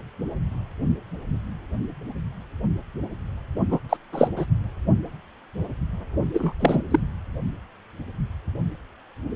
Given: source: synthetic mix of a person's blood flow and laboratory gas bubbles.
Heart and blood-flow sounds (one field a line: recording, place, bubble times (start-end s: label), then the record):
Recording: Doppler ultrasound of blood flow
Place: precordium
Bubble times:
3.71-3.80 s: bubbles
3.89-3.97 s: bubbles
4.12-4.28 s: bubbles
4.36-4.46 s: bubbles
6.33-6.52 s: bubbles
6.59-6.81 s: bubbles
6.90-7.00 s: bubbles
From the record:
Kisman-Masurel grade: 222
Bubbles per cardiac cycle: several, 3 to 8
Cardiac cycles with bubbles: 10 to 50%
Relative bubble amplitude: moderate (0.250 to 0.450)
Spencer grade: 2 (many but less than half of the cardiac periods contain bubble signals, singularly or in groups)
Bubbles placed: only in the low amplitude regions of the cardiac cycle